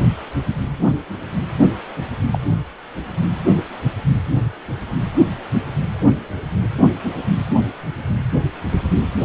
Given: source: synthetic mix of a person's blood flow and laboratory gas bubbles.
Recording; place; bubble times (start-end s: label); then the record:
Doppler ultrasound of blood flow; precordium
2.32-2.39 s: bubbles
From the record:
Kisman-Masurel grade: 112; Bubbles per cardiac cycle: 1 to 2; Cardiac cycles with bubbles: 1 to 10%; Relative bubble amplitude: moderate (0.250 to 0.450); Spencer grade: 1 (occasional bubble signal discernible with the cardiac motion signal, with majority of cardiac periods free of bubbles); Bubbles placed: anywhere in the cardiac cycle